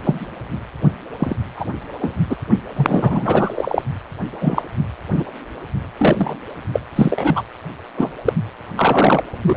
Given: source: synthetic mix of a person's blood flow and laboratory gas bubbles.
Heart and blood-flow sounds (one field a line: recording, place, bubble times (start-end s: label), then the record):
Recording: Doppler ultrasound of blood flow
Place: precordium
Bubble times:
0.04-0.25 s: bubbles
1.19-1.36 s: bubbles
1.56-1.65 s: bubbles
2.00-2.21 s: bubbles
2.29-2.37 s: bubbles
2.52-2.58 s: bubbles
2.76-3.84 s: bubbles
4.40-4.62 s: bubbles
5.11-5.23 s: bubbles
5.84-5.88 s: bubbles
5.97-6.36 s: bubbles
6.73-6.80 s: bubbles
6.95-7.42 s: bubbles
7.97-8.12 s: bubbles
8.25-8.33 s: bubbles
8.76-9.24 s: bubbles
9.46-9.57 s: bubbles
From the record:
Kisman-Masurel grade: 243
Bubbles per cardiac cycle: several, 3 to 8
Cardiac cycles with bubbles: 100%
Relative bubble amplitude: loud (0.450 to 0.775)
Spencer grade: 3 (all of the cardiac periods contain showers or single bubble signals, but not dominating or overriding the cardiac motion signals)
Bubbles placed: anywhere in the cardiac cycle